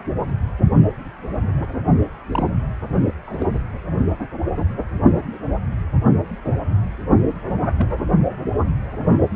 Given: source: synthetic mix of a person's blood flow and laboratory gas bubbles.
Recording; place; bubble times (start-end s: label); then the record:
Doppler ultrasound of blood flow; precordium
2.31-2.47 s: bubbles
3.25-3.46 s: bubbles
3.53-3.58 s: bubbles
7.78-7.86 s: bubbles
From the record:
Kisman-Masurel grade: 122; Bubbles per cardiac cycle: 1 to 2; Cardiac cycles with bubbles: 10 to 50%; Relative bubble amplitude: moderate (0.250 to 0.450); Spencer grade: 2 (many but less than half of the cardiac periods contain bubble signals, singularly or in groups); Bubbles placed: only in the low amplitude regions of the cardiac cycle